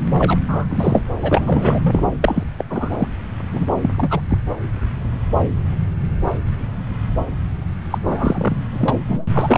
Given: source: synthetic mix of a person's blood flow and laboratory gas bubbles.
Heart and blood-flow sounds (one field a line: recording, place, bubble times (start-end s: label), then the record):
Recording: Doppler ultrasound of blood flow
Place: subclavian vein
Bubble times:
0.18-0.39 s: bubbles
0.48-1.02 s: bubbles
1.22-1.79 s: bubbles
1.82-2.04 s: bubbles
2.22-2.43 s: bubbles
2.59-2.64 s: bubbles
2.70-3.09 s: bubbles
3.53-3.68 s: bubbles
3.82-3.94 s: bubbles
3.98-4.21 s: bubbles
4.29-4.38 s: bubbles
7.90-7.98 s: bubbles
8.04-8.65 s: bubbles
8.73-8.96 s: bubbles
9.09-9.27 s: bubbles
9.34-9.58 s: bubbles
From the record:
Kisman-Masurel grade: 233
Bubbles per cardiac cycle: several, 3 to 8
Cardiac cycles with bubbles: 50 to 99%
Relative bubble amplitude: loud (0.450 to 0.775)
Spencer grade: 3 (all of the cardiac periods contain showers or single bubble signals, but not dominating or overriding the cardiac motion signals)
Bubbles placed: anywhere in the cardiac cycle